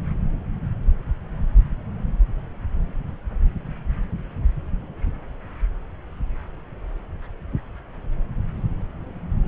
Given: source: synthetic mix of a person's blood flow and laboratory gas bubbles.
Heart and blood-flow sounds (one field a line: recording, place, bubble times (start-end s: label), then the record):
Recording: Doppler ultrasound of blood flow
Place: subclavian vein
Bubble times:
no bubbles
From the record:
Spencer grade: 0 (complete lack of bubble signals)